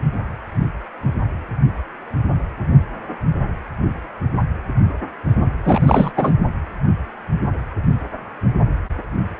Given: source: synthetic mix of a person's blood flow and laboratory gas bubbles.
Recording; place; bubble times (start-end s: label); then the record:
Doppler ultrasound of blood flow; precordium
5.65-6.12 s: bubbles
6.17-6.32 s: bubbles
From the record:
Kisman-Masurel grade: 223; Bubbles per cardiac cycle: several, 3 to 8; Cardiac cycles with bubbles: 10 to 50%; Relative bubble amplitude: loud (0.450 to 0.775); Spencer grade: 2 (many but less than half of the cardiac periods contain bubble signals, singularly or in groups); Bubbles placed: only in the low amplitude regions of the cardiac cycle